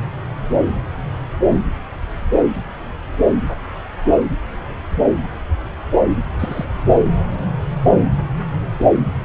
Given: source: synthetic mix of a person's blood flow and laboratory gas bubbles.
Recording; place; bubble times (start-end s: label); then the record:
Doppler ultrasound of blood flow; subclavian vein
6.39-6.65 s: bubbles
From the record:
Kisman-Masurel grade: 112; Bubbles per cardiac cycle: 1 to 2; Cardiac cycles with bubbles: 1 to 10%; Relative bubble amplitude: moderate (0.250 to 0.450); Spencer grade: 1 (occasional bubble signal discernible with the cardiac motion signal, with majority of cardiac periods free of bubbles); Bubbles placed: anywhere in the cardiac cycle